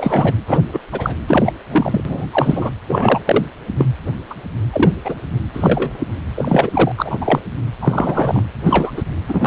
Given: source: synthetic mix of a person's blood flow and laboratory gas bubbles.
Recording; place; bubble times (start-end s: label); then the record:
Doppler ultrasound of blood flow; precordium
0.00-0.33 s: bubbles
0.47-0.61 s: bubbles
0.73-0.79 s: bubbles
0.92-1.14 s: bubbles
1.27-1.52 s: bubbles
1.70-2.25 s: bubbles
2.31-2.71 s: bubbles
2.88-3.19 s: bubbles
3.25-3.45 s: bubbles
3.77-3.85 s: bubbles
4.29-4.33 s: bubbles
4.72-4.95 s: bubbles
5.04-5.15 s: bubbles
5.53-5.92 s: bubbles
6.35-6.92 s: bubbles
6.97-7.39 s: bubbles
7.81-8.41 s: bubbles
8.65-8.91 s: bubbles
8.96-9.03 s: bubbles
9.28-9.47 s: bubbles
From the record:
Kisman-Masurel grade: 243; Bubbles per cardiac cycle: several, 3 to 8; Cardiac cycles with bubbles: 100%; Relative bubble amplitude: loud (0.450 to 0.775); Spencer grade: 3 (all of the cardiac periods contain showers or single bubble signals, but not dominating or overriding the cardiac motion signals); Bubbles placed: anywhere in the cardiac cycle